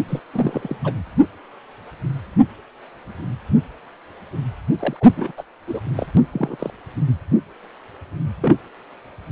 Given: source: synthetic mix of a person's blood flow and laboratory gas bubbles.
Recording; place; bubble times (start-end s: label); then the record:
Doppler ultrasound of blood flow; precordium
0.09-0.20 s: bubbles
0.34-0.76 s: bubbles
0.84-0.93 s: bubbles
4.79-4.96 s: bubbles
5.00-5.09 s: bubbles
5.17-5.31 s: bubbles
5.36-5.43 s: bubbles
5.67-5.80 s: bubbles
5.96-6.06 s: bubbles
6.17-6.22 s: bubbles
6.32-6.56 s: bubbles
6.59-6.70 s: bubbles
8.41-8.56 s: bubbles
From the record:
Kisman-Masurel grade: 232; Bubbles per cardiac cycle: several, 3 to 8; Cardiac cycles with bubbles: 50 to 99%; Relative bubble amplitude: moderate (0.250 to 0.450); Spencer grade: 3 (all of the cardiac periods contain showers or single bubble signals, but not dominating or overriding the cardiac motion signals); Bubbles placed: anywhere in the cardiac cycle